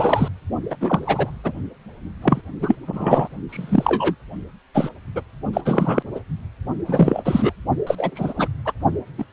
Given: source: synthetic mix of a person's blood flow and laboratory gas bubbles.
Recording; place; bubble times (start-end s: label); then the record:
Doppler ultrasound of blood flow; precordium
0.00-0.28 s: bubbles
0.70-0.77 s: bubbles
0.80-1.31 s: bubbles
1.44-1.52 s: bubbles
2.22-2.42 s: bubbles
2.60-2.75 s: bubbles
2.86-3.28 s: bubbles
3.49-4.15 s: bubbles
4.74-4.89 s: bubbles
5.15-5.21 s: bubbles
5.53-5.61 s: bubbles
5.65-6.02 s: bubbles
6.14-6.20 s: bubbles
6.85-7.21 s: bubbles
7.25-7.52 s: bubbles
7.87-7.95 s: bubbles
7.97-8.11 s: bubbles
8.15-8.33 s: bubbles
8.37-8.48 s: bubbles
8.65-8.72 s: bubbles
9.18-9.24 s: bubbles
From the record:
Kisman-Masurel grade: 243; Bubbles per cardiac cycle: several, 3 to 8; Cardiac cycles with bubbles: 100%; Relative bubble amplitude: loud (0.450 to 0.775); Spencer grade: 3 (all of the cardiac periods contain showers or single bubble signals, but not dominating or overriding the cardiac motion signals); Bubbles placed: only in the low amplitude regions of the cardiac cycle